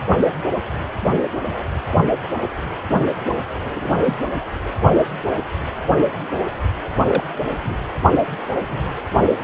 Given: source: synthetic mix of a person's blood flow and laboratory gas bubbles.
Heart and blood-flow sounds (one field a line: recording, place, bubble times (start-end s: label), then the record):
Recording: Doppler ultrasound of blood flow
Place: precordium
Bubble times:
3.65-3.90 s: bubbles
4.05-4.17 s: bubbles
7.07-7.24 s: bubbles
7.62-7.78 s: bubbles
8.68-8.80 s: bubbles
From the record:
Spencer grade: 2 (many but less than half of the cardiac periods contain bubble signals, singularly or in groups)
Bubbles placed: only in the low amplitude regions of the cardiac cycle